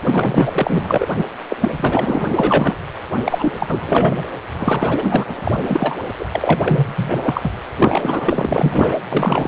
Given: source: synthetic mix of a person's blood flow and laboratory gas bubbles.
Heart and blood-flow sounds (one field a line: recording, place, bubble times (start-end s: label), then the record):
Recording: Doppler ultrasound of blood flow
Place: precordium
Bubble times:
0.04-1.05 s: bubbles
1.17-1.25 s: bubbles
1.49-1.56 s: bubbles
1.60-2.79 s: bubbles
3.25-3.52 s: bubbles
3.59-4.26 s: bubbles
4.58-5.25 s: bubbles
5.28-5.36 s: bubbles
5.45-5.52 s: bubbles
5.63-5.96 s: bubbles
6.19-7.52 s: bubbles
7.77-8.96 s: bubbles
9.11-9.48 s: bubbles
From the record:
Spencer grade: 4 (maximum detectable bubble signal sounding continuously throughout systole and diastole of every cardiac period, and overriding the amplitude of the normal cardiac signals)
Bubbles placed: anywhere in the cardiac cycle